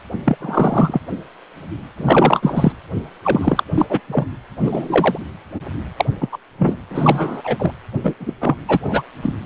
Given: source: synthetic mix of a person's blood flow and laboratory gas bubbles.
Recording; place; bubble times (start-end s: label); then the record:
Doppler ultrasound of blood flow; precordium
0.25-0.38 s: bubbles
0.40-0.99 s: bubbles
1.97-2.73 s: bubbles
3.24-3.63 s: bubbles
3.74-3.86 s: bubbles
3.89-4.00 s: bubbles
4.08-4.25 s: bubbles
4.60-5.18 s: bubbles
5.96-6.05 s: bubbles
6.21-6.38 s: bubbles
6.58-6.76 s: bubbles
6.90-7.55 s: bubbles
7.58-7.72 s: bubbles
8.03-8.15 s: bubbles
8.20-8.34 s: bubbles
8.41-8.56 s: bubbles
8.68-8.79 s: bubbles
8.83-9.03 s: bubbles
9.22-9.34 s: bubbles
From the record:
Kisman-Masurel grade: 233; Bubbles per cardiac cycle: several, 3 to 8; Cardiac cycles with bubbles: 50 to 99%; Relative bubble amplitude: loud (0.450 to 0.775); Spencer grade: 3 (all of the cardiac periods contain showers or single bubble signals, but not dominating or overriding the cardiac motion signals); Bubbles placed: anywhere in the cardiac cycle